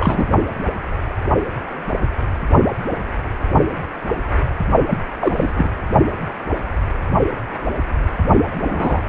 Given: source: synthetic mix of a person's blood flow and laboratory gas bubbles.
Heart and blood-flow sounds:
Doppler ultrasound of blood flow; precordium
0.00-0.28 s: bubbles
4.90-4.97 s: bubbles
5.21-5.53 s: bubbles
5.56-5.70 s: bubbles
8.60-9.01 s: bubbles
From the record:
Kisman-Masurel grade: 222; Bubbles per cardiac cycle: several, 3 to 8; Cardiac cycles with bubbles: 10 to 50%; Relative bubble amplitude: moderate (0.250 to 0.450); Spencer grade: 2 (many but less than half of the cardiac periods contain bubble signals, singularly or in groups); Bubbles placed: only in the low amplitude regions of the cardiac cycle

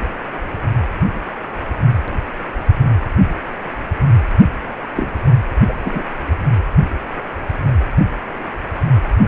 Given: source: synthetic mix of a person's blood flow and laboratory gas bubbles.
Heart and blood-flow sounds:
Doppler ultrasound of blood flow; precordium
4.96-5.09 s: bubbles
5.68-5.74 s: bubbles
5.84-6.04 s: bubbles
From the record:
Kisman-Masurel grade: 123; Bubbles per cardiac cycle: 1 to 2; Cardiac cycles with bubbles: 10 to 50%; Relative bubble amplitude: loud (0.450 to 0.775); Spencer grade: 2 (many but less than half of the cardiac periods contain bubble signals, singularly or in groups); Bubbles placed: anywhere in the cardiac cycle

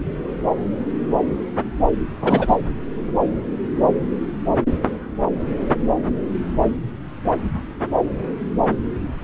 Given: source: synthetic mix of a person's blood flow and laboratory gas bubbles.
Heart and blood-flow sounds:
Doppler ultrasound of blood flow; subclavian vein
2.21-2.57 s: bubbles
From the record:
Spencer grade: 1 (occasional bubble signal discernible with the cardiac motion signal, with majority of cardiac periods free of bubbles); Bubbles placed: anywhere in the cardiac cycle

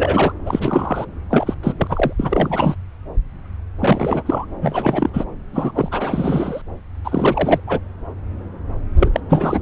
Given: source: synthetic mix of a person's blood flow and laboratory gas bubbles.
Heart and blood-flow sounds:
Doppler ultrasound of blood flow; subclavian vein
0.00-0.33 s: bubbles
0.46-1.05 s: bubbles
1.30-1.54 s: bubbles
1.63-1.73 s: bubbles
1.77-2.13 s: bubbles
2.19-2.75 s: bubbles
3.78-4.46 s: bubbles
4.60-5.10 s: bubbles
5.13-5.25 s: bubbles
5.53-5.71 s: bubbles
5.75-6.62 s: bubbles
7.04-7.60 s: bubbles
7.67-7.79 s: bubbles
8.96-9.11 s: bubbles
9.13-9.21 s: bubbles
9.29-9.59 s: bubbles
From the record:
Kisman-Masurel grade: 333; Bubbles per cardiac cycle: rolling drumbeat, 9 or more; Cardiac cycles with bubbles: 50 to 99%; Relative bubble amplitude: loud (0.450 to 0.775); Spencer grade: 3 (all of the cardiac periods contain showers or single bubble signals, but not dominating or overriding the cardiac motion signals); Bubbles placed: anywhere in the cardiac cycle

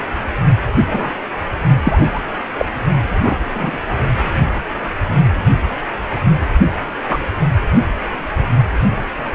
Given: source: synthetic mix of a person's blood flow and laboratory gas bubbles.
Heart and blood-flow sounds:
Doppler ultrasound of blood flow; precordium
0.85-1.11 s: bubbles
1.82-2.21 s: bubbles
2.58-2.66 s: bubbles
3.21-3.38 s: bubbles
3.54-3.80 s: bubbles
7.08-7.17 s: bubbles
From the record:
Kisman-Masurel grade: 123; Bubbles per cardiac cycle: 1 to 2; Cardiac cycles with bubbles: 10 to 50%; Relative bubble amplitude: loud (0.450 to 0.775); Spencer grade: 2 (many but less than half of the cardiac periods contain bubble signals, singularly or in groups); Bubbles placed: only in the low amplitude regions of the cardiac cycle

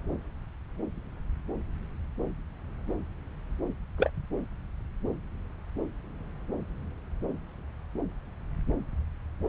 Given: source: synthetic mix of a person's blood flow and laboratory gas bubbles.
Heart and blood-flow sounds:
Doppler ultrasound of blood flow; subclavian vein
3.98-4.10 s: bubbles
From the record:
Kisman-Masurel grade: 112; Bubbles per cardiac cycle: 1 to 2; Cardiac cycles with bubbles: 1 to 10%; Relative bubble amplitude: moderate (0.250 to 0.450); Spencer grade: 1 (occasional bubble signal discernible with the cardiac motion signal, with majority of cardiac periods free of bubbles); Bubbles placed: anywhere in the cardiac cycle

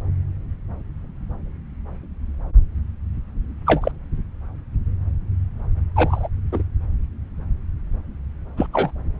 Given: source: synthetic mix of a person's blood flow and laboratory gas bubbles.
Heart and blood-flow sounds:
Doppler ultrasound of blood flow; subclavian vein
3.67-3.92 s: bubbles
5.96-6.27 s: bubbles
6.52-6.62 s: bubbles
8.57-8.66 s: bubbles
8.73-8.91 s: bubbles
From the record:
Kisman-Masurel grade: 123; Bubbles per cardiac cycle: 1 to 2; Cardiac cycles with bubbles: 10 to 50%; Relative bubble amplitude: loud (0.450 to 0.775); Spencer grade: 2 (many but less than half of the cardiac periods contain bubble signals, singularly or in groups); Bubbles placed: anywhere in the cardiac cycle

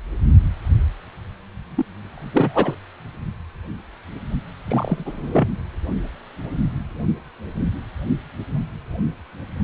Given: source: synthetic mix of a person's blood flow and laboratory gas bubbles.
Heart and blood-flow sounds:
Doppler ultrasound of blood flow; precordium
1.76-1.85 s: bubbles
2.15-2.75 s: bubbles
4.67-5.48 s: bubbles
From the record:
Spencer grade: 2 (many but less than half of the cardiac periods contain bubble signals, singularly or in groups); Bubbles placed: only in the low amplitude regions of the cardiac cycle

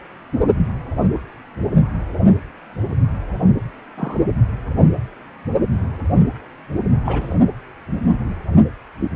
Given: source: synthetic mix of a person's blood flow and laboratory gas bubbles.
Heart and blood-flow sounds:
Doppler ultrasound of blood flow; precordium
3.97-4.20 s: bubbles
7.05-7.34 s: bubbles
From the record:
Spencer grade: 2 (many but less than half of the cardiac periods contain bubble signals, singularly or in groups); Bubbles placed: only in the low amplitude regions of the cardiac cycle

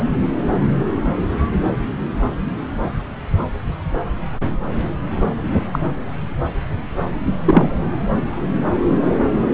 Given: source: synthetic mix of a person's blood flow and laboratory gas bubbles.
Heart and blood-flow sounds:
Doppler ultrasound of blood flow; subclavian vein
5.72-5.79 s: bubbles
7.45-7.71 s: bubbles
From the record:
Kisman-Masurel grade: 113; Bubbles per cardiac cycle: 1 to 2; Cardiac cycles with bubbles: 1 to 10%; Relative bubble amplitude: loud (0.450 to 0.775); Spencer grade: 1 (occasional bubble signal discernible with the cardiac motion signal, with majority of cardiac periods free of bubbles); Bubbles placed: anywhere in the cardiac cycle

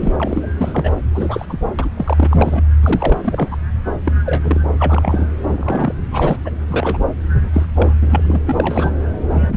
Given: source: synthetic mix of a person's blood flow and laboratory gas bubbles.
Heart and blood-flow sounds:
Doppler ultrasound of blood flow; subclavian vein
0.00-0.11 s: bubbles
0.20-0.46 s: bubbles
0.59-0.92 s: bubbles
1.14-1.46 s: bubbles
1.49-1.59 s: bubbles
1.79-1.90 s: bubbles
1.97-2.27 s: bubbles
2.31-2.68 s: bubbles
2.83-3.19 s: bubbles
3.23-3.58 s: bubbles
4.05-4.12 s: bubbles
4.25-4.60 s: bubbles
4.78-5.32 s: bubbles
5.52-5.94 s: bubbles
6.11-6.57 s: bubbles
6.68-6.98 s: bubbles
7.53-7.67 s: bubbles
7.75-7.93 s: bubbles
8.01-8.41 s: bubbles
8.46-8.91 s: bubbles
9.31-9.57 s: bubbles
From the record:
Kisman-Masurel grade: 242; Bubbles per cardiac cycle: several, 3 to 8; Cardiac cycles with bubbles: 100%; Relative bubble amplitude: moderate (0.250 to 0.450); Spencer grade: 3 (all of the cardiac periods contain showers or single bubble signals, but not dominating or overriding the cardiac motion signals); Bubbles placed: anywhere in the cardiac cycle

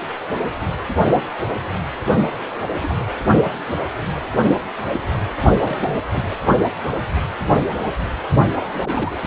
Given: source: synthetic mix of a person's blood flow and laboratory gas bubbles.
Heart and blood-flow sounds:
Doppler ultrasound of blood flow; precordium
2.50-2.59 s: bubbles
2.73-3.05 s: bubbles
5.60-6.00 s: bubbles
6.04-6.06 s: bubbles
6.11-6.38 s: bubbles
8.60-9.21 s: bubbles
From the record:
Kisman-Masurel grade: 221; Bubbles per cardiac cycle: several, 3 to 8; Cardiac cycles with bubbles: 10 to 50%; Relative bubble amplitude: barely perceptible (0.100 to 0.250); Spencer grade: 2 (many but less than half of the cardiac periods contain bubble signals, singularly or in groups); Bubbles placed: only in the low amplitude regions of the cardiac cycle

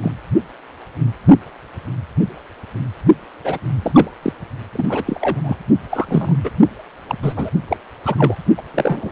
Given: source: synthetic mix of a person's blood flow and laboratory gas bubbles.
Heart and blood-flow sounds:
Doppler ultrasound of blood flow; precordium
0.01-0.12 s: bubbles
3.44-3.58 s: bubbles
3.83-4.10 s: bubbles
4.22-4.33 s: bubbles
4.73-5.03 s: bubbles
5.06-5.42 s: bubbles
5.44-5.57 s: bubbles
5.90-6.05 s: bubbles
6.08-6.36 s: bubbles
6.43-6.51 s: bubbles
7.07-7.16 s: bubbles
7.23-7.33 s: bubbles
7.36-7.50 s: bubbles
7.68-7.77 s: bubbles
8.05-8.35 s: bubbles
8.57-8.62 s: bubbles
8.74-9.12 s: bubbles
From the record:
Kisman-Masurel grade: 233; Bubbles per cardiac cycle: several, 3 to 8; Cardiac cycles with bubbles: 50 to 99%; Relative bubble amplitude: loud (0.450 to 0.775); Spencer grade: 3 (all of the cardiac periods contain showers or single bubble signals, but not dominating or overriding the cardiac motion signals); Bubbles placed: only in the low amplitude regions of the cardiac cycle

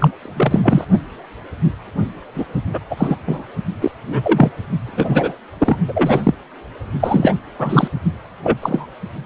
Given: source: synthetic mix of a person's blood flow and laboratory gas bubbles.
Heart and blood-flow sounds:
Doppler ultrasound of blood flow; precordium
0.00-0.12 s: bubbles
0.21-0.60 s: bubbles
0.62-0.84 s: bubbles
2.35-2.46 s: bubbles
2.73-2.79 s: bubbles
2.90-3.16 s: bubbles
3.27-3.42 s: bubbles
3.80-3.92 s: bubbles
4.08-4.50 s: bubbles
4.87-5.34 s: bubbles
5.58-5.76 s: bubbles
5.88-6.34 s: bubbles
7.00-7.34 s: bubbles
7.58-7.88 s: bubbles
8.43-8.59 s: bubbles
8.61-8.87 s: bubbles
From the record:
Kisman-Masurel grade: 233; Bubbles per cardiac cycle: several, 3 to 8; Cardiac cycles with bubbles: 50 to 99%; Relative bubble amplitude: loud (0.450 to 0.775); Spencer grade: 3 (all of the cardiac periods contain showers or single bubble signals, but not dominating or overriding the cardiac motion signals); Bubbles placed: only in the low amplitude regions of the cardiac cycle

